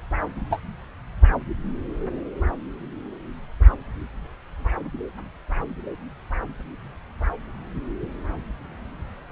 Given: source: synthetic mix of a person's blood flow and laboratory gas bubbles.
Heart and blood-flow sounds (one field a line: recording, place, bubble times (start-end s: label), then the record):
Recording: Doppler ultrasound of blood flow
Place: subclavian vein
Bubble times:
0.51-0.60 s: bubbles
From the record:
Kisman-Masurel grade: 112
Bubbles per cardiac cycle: 1 to 2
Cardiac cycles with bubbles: 1 to 10%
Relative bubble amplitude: moderate (0.250 to 0.450)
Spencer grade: 1 (occasional bubble signal discernible with the cardiac motion signal, with majority of cardiac periods free of bubbles)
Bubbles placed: anywhere in the cardiac cycle